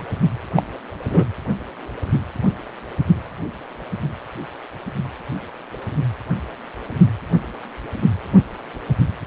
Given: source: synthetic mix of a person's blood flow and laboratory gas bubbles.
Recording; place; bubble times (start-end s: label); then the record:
Doppler ultrasound of blood flow; precordium
0.54-0.63 s: bubbles
1.10-1.24 s: bubbles
From the record:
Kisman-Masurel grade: 113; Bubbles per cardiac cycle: 1 to 2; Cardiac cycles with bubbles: 1 to 10%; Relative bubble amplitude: loud (0.450 to 0.775); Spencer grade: 1 (occasional bubble signal discernible with the cardiac motion signal, with majority of cardiac periods free of bubbles); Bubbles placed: anywhere in the cardiac cycle